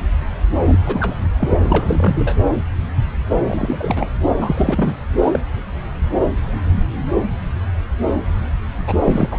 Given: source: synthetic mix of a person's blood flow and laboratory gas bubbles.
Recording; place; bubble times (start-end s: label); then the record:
Doppler ultrasound of blood flow; subclavian vein
0.66-0.78 s: bubbles
0.86-1.15 s: bubbles
1.39-1.59 s: bubbles
1.61-2.37 s: bubbles
3.37-4.08 s: bubbles
4.41-4.95 s: bubbles
5.17-5.39 s: bubbles
8.87-8.94 s: bubbles
9.06-9.39 s: bubbles
From the record:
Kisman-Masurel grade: 332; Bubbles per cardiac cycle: rolling drumbeat, 9 or more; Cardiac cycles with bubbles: 50 to 99%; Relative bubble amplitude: moderate (0.250 to 0.450); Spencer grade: 3 (all of the cardiac periods contain showers or single bubble signals, but not dominating or overriding the cardiac motion signals); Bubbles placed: anywhere in the cardiac cycle